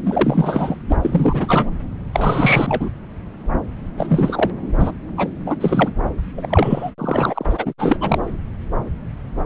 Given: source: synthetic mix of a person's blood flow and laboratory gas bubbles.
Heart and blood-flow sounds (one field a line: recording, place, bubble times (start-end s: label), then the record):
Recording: Doppler ultrasound of blood flow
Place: subclavian vein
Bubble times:
0.04-0.76 s: bubbles
0.88-0.97 s: bubbles
1.01-1.70 s: bubbles
2.12-2.91 s: bubbles
3.97-4.50 s: bubbles
4.79-4.92 s: bubbles
5.17-5.29 s: bubbles
5.46-5.57 s: bubbles
5.60-5.91 s: bubbles
6.37-6.90 s: bubbles
6.98-7.45 s: bubbles
7.50-7.73 s: bubbles
7.78-7.97 s: bubbles
8.00-8.33 s: bubbles
From the record:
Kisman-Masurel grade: 333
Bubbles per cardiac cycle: rolling drumbeat, 9 or more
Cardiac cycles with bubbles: 50 to 99%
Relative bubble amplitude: loud (0.450 to 0.775)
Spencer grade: 3 (all of the cardiac periods contain showers or single bubble signals, but not dominating or overriding the cardiac motion signals)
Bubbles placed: anywhere in the cardiac cycle